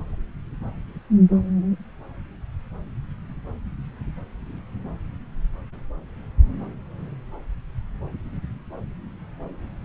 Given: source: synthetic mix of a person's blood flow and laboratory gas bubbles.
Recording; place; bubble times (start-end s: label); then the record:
Doppler ultrasound of blood flow; subclavian vein
no bubbles
From the record:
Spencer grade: 0 (complete lack of bubble signals)